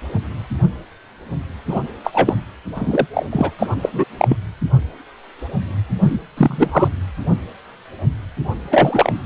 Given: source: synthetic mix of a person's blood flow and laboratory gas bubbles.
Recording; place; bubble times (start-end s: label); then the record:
Doppler ultrasound of blood flow; precordium
1.68-1.81 s: bubbles
2.04-2.10 s: bubbles
2.13-2.34 s: bubbles
2.75-3.07 s: bubbles
3.14-3.28 s: bubbles
3.31-3.51 s: bubbles
3.58-3.67 s: bubbles
3.82-3.89 s: bubbles
3.93-4.05 s: bubbles
4.18-4.37 s: bubbles
6.02-6.18 s: bubbles
6.37-6.89 s: bubbles
8.71-9.12 s: bubbles
From the record:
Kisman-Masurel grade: 233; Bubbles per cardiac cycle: several, 3 to 8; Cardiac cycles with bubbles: 50 to 99%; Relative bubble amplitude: loud (0.450 to 0.775); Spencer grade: 3 (all of the cardiac periods contain showers or single bubble signals, but not dominating or overriding the cardiac motion signals); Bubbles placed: anywhere in the cardiac cycle